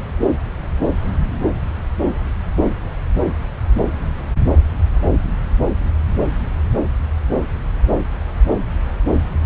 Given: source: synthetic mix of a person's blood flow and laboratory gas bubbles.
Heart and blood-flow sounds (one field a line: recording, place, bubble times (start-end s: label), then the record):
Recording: Doppler ultrasound of blood flow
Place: subclavian vein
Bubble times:
no bubbles
From the record:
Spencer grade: 0 (complete lack of bubble signals)